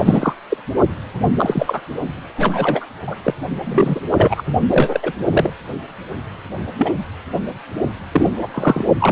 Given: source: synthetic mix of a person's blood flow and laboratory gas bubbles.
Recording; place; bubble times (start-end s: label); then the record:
Doppler ultrasound of blood flow; precordium
0.00-0.33 s: bubbles
0.50-0.57 s: bubbles
1.36-1.81 s: bubbles
2.37-2.86 s: bubbles
3.07-3.16 s: bubbles
3.23-3.33 s: bubbles
3.64-4.00 s: bubbles
4.09-4.43 s: bubbles
4.69-5.00 s: bubbles
5.02-5.12 s: bubbles
5.29-5.50 s: bubbles
6.75-6.94 s: bubbles
8.12-8.29 s: bubbles
8.39-8.48 s: bubbles
8.54-8.85 s: bubbles
8.99-9.12 s: bubbles
From the record:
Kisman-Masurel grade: 233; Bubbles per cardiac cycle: several, 3 to 8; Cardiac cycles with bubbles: 50 to 99%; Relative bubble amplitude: loud (0.450 to 0.775); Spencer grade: 3 (all of the cardiac periods contain showers or single bubble signals, but not dominating or overriding the cardiac motion signals); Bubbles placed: only in the low amplitude regions of the cardiac cycle